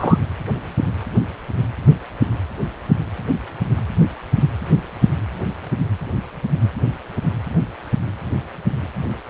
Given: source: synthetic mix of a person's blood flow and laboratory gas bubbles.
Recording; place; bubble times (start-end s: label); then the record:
Doppler ultrasound of blood flow; precordium
0.00-0.17 s: bubbles
From the record:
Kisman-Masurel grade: 113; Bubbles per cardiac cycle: 1 to 2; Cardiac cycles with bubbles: 1 to 10%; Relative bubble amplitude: loud (0.450 to 0.775); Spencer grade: 1 (occasional bubble signal discernible with the cardiac motion signal, with majority of cardiac periods free of bubbles); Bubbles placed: anywhere in the cardiac cycle